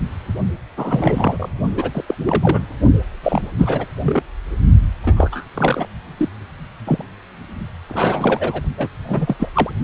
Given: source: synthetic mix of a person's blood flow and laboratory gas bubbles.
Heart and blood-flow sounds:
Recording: Doppler ultrasound of blood flow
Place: precordium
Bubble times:
0.00-0.03 s: bubbles
0.77-1.49 s: bubbles
1.76-2.03 s: bubbles
2.07-2.15 s: bubbles
2.27-2.67 s: bubbles
3.23-3.42 s: bubbles
3.58-3.85 s: bubbles
4.02-4.22 s: bubbles
5.02-5.46 s: bubbles
5.55-5.88 s: bubbles
6.17-6.29 s: bubbles
6.87-7.04 s: bubbles
7.89-8.61 s: bubbles
8.78-8.88 s: bubbles
9.07-9.36 s: bubbles
9.38-9.49 s: bubbles
9.54-9.70 s: bubbles
From the record:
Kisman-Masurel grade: 242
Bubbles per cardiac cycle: several, 3 to 8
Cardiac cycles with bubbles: 100%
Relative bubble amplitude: moderate (0.250 to 0.450)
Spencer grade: 3 (all of the cardiac periods contain showers or single bubble signals, but not dominating or overriding the cardiac motion signals)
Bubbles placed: only in the low amplitude regions of the cardiac cycle

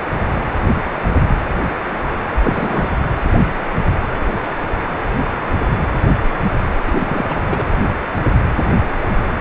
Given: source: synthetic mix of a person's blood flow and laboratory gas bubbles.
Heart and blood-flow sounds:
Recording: Doppler ultrasound of blood flow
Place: precordium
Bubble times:
2.42-2.94 s: bubbles
6.85-7.41 s: bubbles
7.50-7.64 s: bubbles
From the record:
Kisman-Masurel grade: 222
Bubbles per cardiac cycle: several, 3 to 8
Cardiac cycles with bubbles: 10 to 50%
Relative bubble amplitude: moderate (0.250 to 0.450)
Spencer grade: 2 (many but less than half of the cardiac periods contain bubble signals, singularly or in groups)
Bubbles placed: anywhere in the cardiac cycle

